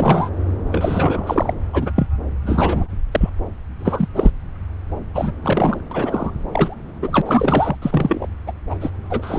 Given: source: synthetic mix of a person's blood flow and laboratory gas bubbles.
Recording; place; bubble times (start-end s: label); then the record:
Doppler ultrasound of blood flow; subclavian vein
0.00-0.29 s: bubbles
0.72-1.54 s: bubbles
1.73-1.92 s: bubbles
1.95-2.07 s: bubbles
2.46-2.88 s: bubbles
3.11-3.30 s: bubbles
3.79-4.08 s: bubbles
4.16-4.30 s: bubbles
5.14-5.33 s: bubbles
5.42-5.80 s: bubbles
5.91-6.30 s: bubbles
6.52-6.75 s: bubbles
7.02-7.21 s: bubbles
7.25-7.78 s: bubbles
7.82-8.27 s: bubbles
8.46-8.52 s: bubbles
8.70-8.75 s: bubbles
8.81-8.91 s: bubbles
9.10-9.39 s: bubbles
From the record:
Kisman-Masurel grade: 242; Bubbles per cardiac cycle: several, 3 to 8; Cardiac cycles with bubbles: 100%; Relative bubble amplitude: moderate (0.250 to 0.450); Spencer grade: 3 (all of the cardiac periods contain showers or single bubble signals, but not dominating or overriding the cardiac motion signals); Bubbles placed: anywhere in the cardiac cycle